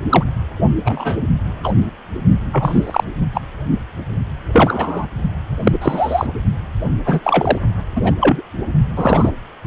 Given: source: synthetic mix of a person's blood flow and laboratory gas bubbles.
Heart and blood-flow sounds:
Doppler ultrasound of blood flow; precordium
0.09-0.24 s: bubbles
0.85-1.17 s: bubbles
1.64-1.74 s: bubbles
2.52-3.04 s: bubbles
3.34-3.41 s: bubbles
4.53-5.06 s: bubbles
5.64-6.27 s: bubbles
7.05-7.20 s: bubbles
7.23-7.59 s: bubbles
7.96-8.16 s: bubbles
8.20-8.42 s: bubbles
8.96-9.32 s: bubbles
From the record:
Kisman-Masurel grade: 243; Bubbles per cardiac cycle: several, 3 to 8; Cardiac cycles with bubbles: 100%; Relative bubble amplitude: loud (0.450 to 0.775); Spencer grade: 3 (all of the cardiac periods contain showers or single bubble signals, but not dominating or overriding the cardiac motion signals); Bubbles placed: only in the low amplitude regions of the cardiac cycle

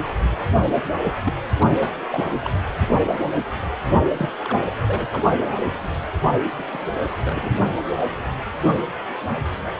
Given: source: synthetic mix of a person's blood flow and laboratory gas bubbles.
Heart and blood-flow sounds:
Doppler ultrasound of blood flow; precordium
1.04-1.14 s: bubbles
1.23-1.33 s: bubbles
1.59-1.91 s: bubbles
2.10-2.35 s: bubbles
2.41-2.51 s: bubbles
4.16-4.29 s: bubbles
4.44-4.75 s: bubbles
4.86-5.23 s: bubbles
6.58-6.63 s: bubbles
6.73-6.85 s: bubbles
7.25-7.53 s: bubbles
From the record:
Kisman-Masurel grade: 222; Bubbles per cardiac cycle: several, 3 to 8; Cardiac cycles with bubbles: 10 to 50%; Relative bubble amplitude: moderate (0.250 to 0.450); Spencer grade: 2 (many but less than half of the cardiac periods contain bubble signals, singularly or in groups); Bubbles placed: only in the low amplitude regions of the cardiac cycle

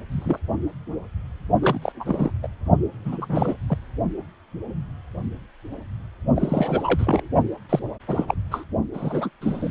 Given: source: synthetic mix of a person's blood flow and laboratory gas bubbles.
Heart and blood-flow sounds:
Doppler ultrasound of blood flow; precordium
0.11-0.39 s: bubbles
1.61-1.79 s: bubbles
1.81-1.92 s: bubbles
2.00-2.31 s: bubbles
2.42-2.47 s: bubbles
3.04-3.54 s: bubbles
3.69-3.77 s: bubbles
6.36-7.28 s: bubbles
7.69-7.80 s: bubbles
8.08-8.25 s: bubbles
8.28-8.35 s: bubbles
8.51-8.64 s: bubbles
8.94-9.29 s: bubbles
9.41-9.71 s: bubbles
From the record:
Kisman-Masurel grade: 232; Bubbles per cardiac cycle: several, 3 to 8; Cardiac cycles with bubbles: 50 to 99%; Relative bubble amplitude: moderate (0.250 to 0.450); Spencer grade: 3 (all of the cardiac periods contain showers or single bubble signals, but not dominating or overriding the cardiac motion signals); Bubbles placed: only in the low amplitude regions of the cardiac cycle

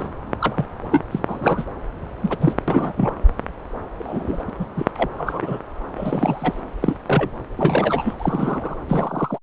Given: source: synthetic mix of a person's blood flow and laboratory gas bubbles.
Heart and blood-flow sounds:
Doppler ultrasound of blood flow; subclavian vein
0.00-0.09 s: bubbles
0.40-0.65 s: bubbles
0.91-1.04 s: bubbles
1.11-1.66 s: bubbles
2.21-2.37 s: bubbles
2.40-2.55 s: bubbles
2.67-2.94 s: bubbles
2.97-3.15 s: bubbles
3.98-4.45 s: bubbles
4.47-4.50 s: bubbles
4.59-4.67 s: bubbles
4.76-4.86 s: bubbles
4.97-5.09 s: bubbles
5.17-5.59 s: bubbles
5.96-6.60 s: bubbles
6.80-6.95 s: bubbles
7.06-7.30 s: bubbles
7.56-8.14 s: bubbles
8.20-8.75 s: bubbles
8.88-9.38 s: bubbles
From the record:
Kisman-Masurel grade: 243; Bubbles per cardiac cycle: several, 3 to 8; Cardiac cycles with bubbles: 100%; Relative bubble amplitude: loud (0.450 to 0.775); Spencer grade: 3 (all of the cardiac periods contain showers or single bubble signals, but not dominating or overriding the cardiac motion signals); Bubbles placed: anywhere in the cardiac cycle

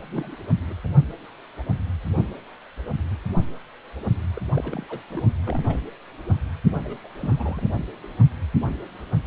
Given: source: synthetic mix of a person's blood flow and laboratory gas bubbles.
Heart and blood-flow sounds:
Doppler ultrasound of blood flow; precordium
0.00-0.36 s: bubbles
0.68-0.74 s: bubbles
0.83-0.87 s: bubbles
4.37-4.40 s: bubbles
4.57-4.86 s: bubbles
4.89-5.00 s: bubbles
5.10-5.23 s: bubbles
5.44-5.79 s: bubbles
6.85-6.96 s: bubbles
7.04-7.08 s: bubbles
7.19-7.68 s: bubbles
8.03-8.08 s: bubbles
From the record:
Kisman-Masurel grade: 221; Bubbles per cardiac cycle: several, 3 to 8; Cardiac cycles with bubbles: 10 to 50%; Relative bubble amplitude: barely perceptible (0.100 to 0.250); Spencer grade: 2 (many but less than half of the cardiac periods contain bubble signals, singularly or in groups); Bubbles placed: only in the low amplitude regions of the cardiac cycle

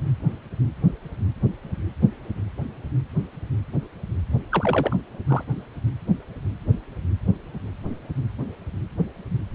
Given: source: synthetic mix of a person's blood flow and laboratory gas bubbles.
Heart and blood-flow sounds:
Doppler ultrasound of blood flow; precordium
4.50-4.96 s: bubbles
5.27-5.43 s: bubbles
From the record:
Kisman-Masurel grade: 122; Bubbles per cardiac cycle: 1 to 2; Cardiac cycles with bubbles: 10 to 50%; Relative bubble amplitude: moderate (0.250 to 0.450); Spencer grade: 2 (many but less than half of the cardiac periods contain bubble signals, singularly or in groups); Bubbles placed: anywhere in the cardiac cycle

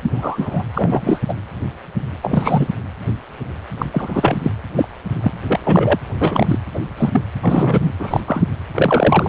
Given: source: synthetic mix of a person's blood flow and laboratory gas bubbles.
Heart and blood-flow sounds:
Doppler ultrasound of blood flow; precordium
0.02-0.10 s: bubbles
0.14-0.63 s: bubbles
0.74-1.18 s: bubbles
1.28-1.34 s: bubbles
2.23-2.67 s: bubbles
3.78-3.86 s: bubbles
3.92-4.37 s: bubbles
4.42-4.51 s: bubbles
4.76-4.88 s: bubbles
5.21-5.32 s: bubbles
5.47-5.60 s: bubbles
5.64-6.00 s: bubbles
6.19-6.59 s: bubbles
6.74-6.79 s: bubbles
6.97-7.21 s: bubbles
7.42-7.91 s: bubbles
7.99-8.21 s: bubbles
8.27-8.46 s: bubbles
8.74-9.28 s: bubbles
From the record:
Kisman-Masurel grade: 233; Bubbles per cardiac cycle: several, 3 to 8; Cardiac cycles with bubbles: 50 to 99%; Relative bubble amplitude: loud (0.450 to 0.775); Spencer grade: 3 (all of the cardiac periods contain showers or single bubble signals, but not dominating or overriding the cardiac motion signals); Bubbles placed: anywhere in the cardiac cycle

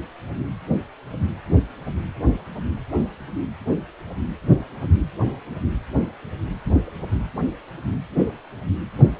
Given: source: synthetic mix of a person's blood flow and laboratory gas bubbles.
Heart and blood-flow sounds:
Doppler ultrasound of blood flow; precordium
no bubbles
From the record:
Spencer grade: 0 (complete lack of bubble signals)

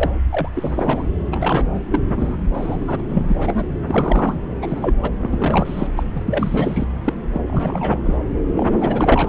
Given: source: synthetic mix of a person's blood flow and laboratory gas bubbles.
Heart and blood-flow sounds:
Doppler ultrasound of blood flow; subclavian vein
0.00-0.11 s: bubbles
0.30-0.48 s: bubbles
0.54-1.03 s: bubbles
1.31-1.64 s: bubbles
1.72-1.80 s: bubbles
1.92-2.00 s: bubbles
2.08-2.36 s: bubbles
2.54-2.78 s: bubbles
2.80-3.03 s: bubbles
3.08-3.65 s: bubbles
3.87-4.35 s: bubbles
4.62-4.96 s: bubbles
5.02-5.08 s: bubbles
5.18-5.87 s: bubbles
5.96-6.03 s: bubbles
6.15-6.23 s: bubbles
6.27-6.86 s: bubbles
7.04-7.14 s: bubbles
7.32-7.41 s: bubbles
7.47-7.99 s: bubbles
8.04-8.18 s: bubbles
8.55-8.67 s: bubbles
8.70-9.29 s: bubbles
From the record:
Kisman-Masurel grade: 342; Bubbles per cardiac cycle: rolling drumbeat, 9 or more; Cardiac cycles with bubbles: 100%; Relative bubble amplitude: moderate (0.250 to 0.450); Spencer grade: 3 (all of the cardiac periods contain showers or single bubble signals, but not dominating or overriding the cardiac motion signals); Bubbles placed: anywhere in the cardiac cycle

